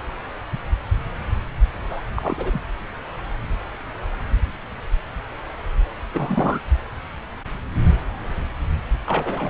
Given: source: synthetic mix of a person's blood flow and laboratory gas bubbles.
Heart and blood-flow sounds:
Doppler ultrasound of blood flow; subclavian vein
1.89-2.02 s: bubbles
2.16-2.62 s: bubbles
6.13-6.60 s: bubbles
9.06-9.49 s: bubbles
From the record:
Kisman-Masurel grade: 221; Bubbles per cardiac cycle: several, 3 to 8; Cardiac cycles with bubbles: 10 to 50%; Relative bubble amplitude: barely perceptible (0.100 to 0.250); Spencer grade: 2 (many but less than half of the cardiac periods contain bubble signals, singularly or in groups); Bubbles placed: anywhere in the cardiac cycle

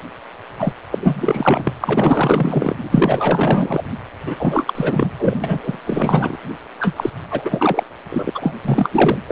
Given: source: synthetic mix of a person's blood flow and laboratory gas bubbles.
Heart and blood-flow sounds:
Doppler ultrasound of blood flow; precordium
0.59-0.73 s: bubbles
0.91-0.99 s: bubbles
1.01-1.70 s: bubbles
1.80-2.76 s: bubbles
2.80-3.84 s: bubbles
4.26-4.36 s: bubbles
4.38-5.07 s: bubbles
5.18-5.41 s: bubbles
5.43-5.76 s: bubbles
5.84-6.38 s: bubbles
6.80-7.10 s: bubbles
7.30-7.83 s: bubbles
8.10-8.32 s: bubbles
8.35-8.54 s: bubbles
8.64-9.18 s: bubbles
9.27-9.32 s: bubbles
From the record:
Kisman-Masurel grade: 444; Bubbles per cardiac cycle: continuous sound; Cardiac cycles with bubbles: 100%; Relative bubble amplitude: maximal (0.775 to 0.999); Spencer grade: 4 (maximum detectable bubble signal sounding continuously throughout systole and diastole of every cardiac period, and overriding the amplitude of the normal cardiac signals); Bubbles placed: anywhere in the cardiac cycle

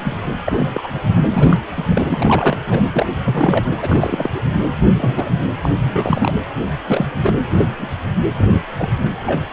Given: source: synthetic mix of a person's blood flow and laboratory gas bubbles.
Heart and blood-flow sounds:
Doppler ultrasound of blood flow; precordium
0.04-0.17 s: bubbles
0.45-0.88 s: bubbles
1.30-1.57 s: bubbles
1.76-1.84 s: bubbles
1.90-2.58 s: bubbles
2.68-2.83 s: bubbles
2.92-3.06 s: bubbles
3.24-3.70 s: bubbles
3.77-4.29 s: bubbles
4.34-4.40 s: bubbles
4.94-5.30 s: bubbles
5.62-5.69 s: bubbles
5.76-6.35 s: bubbles
6.87-7.06 s: bubbles
7.23-7.33 s: bubbles
7.56-7.67 s: bubbles
7.79-7.88 s: bubbles
8.33-8.63 s: bubbles
8.78-8.90 s: bubbles
9.25-9.40 s: bubbles
From the record:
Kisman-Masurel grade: 232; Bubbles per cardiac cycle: several, 3 to 8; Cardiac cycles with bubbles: 50 to 99%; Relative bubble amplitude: moderate (0.250 to 0.450); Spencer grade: 3 (all of the cardiac periods contain showers or single bubble signals, but not dominating or overriding the cardiac motion signals); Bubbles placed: anywhere in the cardiac cycle

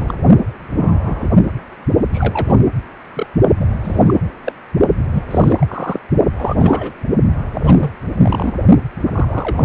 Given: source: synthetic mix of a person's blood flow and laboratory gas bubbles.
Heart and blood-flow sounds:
Doppler ultrasound of blood flow; precordium
0.00-0.14 s: bubbles
0.76-1.28 s: bubbles
2.13-2.58 s: bubbles
3.14-3.27 s: bubbles
3.60-3.66 s: bubbles
3.83-4.16 s: bubbles
4.44-4.53 s: bubbles
5.13-5.24 s: bubbles
5.30-6.00 s: bubbles
6.37-6.56 s: bubbles
6.59-6.92 s: bubbles
7.54-7.91 s: bubbles
8.19-8.54 s: bubbles
9.04-9.65 s: bubbles
From the record:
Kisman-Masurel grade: 242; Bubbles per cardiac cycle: several, 3 to 8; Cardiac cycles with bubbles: 100%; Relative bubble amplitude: moderate (0.250 to 0.450); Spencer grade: 3 (all of the cardiac periods contain showers or single bubble signals, but not dominating or overriding the cardiac motion signals); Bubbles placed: only in the low amplitude regions of the cardiac cycle

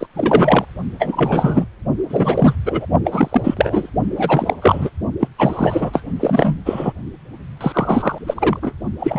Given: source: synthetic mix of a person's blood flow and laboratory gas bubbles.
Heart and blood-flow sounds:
Doppler ultrasound of blood flow; precordium
0.00-0.07 s: bubbles
0.14-0.65 s: bubbles
0.99-1.67 s: bubbles
2.09-2.55 s: bubbles
2.65-2.86 s: bubbles
3.04-3.89 s: bubbles
4.16-4.54 s: bubbles
4.62-4.90 s: bubbles
5.19-5.27 s: bubbles
5.38-6.02 s: bubbles
6.19-6.56 s: bubbles
6.65-6.92 s: bubbles
7.60-8.19 s: bubbles
8.27-8.60 s: bubbles
8.62-8.74 s: bubbles
9.00-9.19 s: bubbles
From the record:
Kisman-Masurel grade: 343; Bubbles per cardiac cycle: rolling drumbeat, 9 or more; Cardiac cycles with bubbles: 100%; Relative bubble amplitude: loud (0.450 to 0.775); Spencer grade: 3 (all of the cardiac periods contain showers or single bubble signals, but not dominating or overriding the cardiac motion signals); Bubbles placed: only in the low amplitude regions of the cardiac cycle

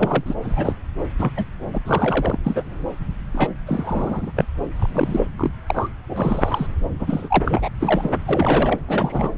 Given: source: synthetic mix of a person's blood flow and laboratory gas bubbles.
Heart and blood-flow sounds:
Doppler ultrasound of blood flow; subclavian vein
0.00-0.34 s: bubbles
0.42-0.75 s: bubbles
1.19-1.31 s: bubbles
1.36-1.45 s: bubbles
1.73-1.78 s: bubbles
1.85-2.41 s: bubbles
2.44-2.62 s: bubbles
3.33-3.48 s: bubbles
3.67-4.31 s: bubbles
4.36-4.45 s: bubbles
4.76-5.27 s: bubbles
5.38-5.52 s: bubbles
5.67-5.89 s: bubbles
6.08-6.67 s: bubbles
6.99-7.69 s: bubbles
7.80-8.10 s: bubbles
8.26-8.79 s: bubbles
8.88-9.31 s: bubbles
From the record:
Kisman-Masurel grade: 242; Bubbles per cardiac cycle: several, 3 to 8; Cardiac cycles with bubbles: 100%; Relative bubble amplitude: moderate (0.250 to 0.450); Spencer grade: 3 (all of the cardiac periods contain showers or single bubble signals, but not dominating or overriding the cardiac motion signals); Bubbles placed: anywhere in the cardiac cycle

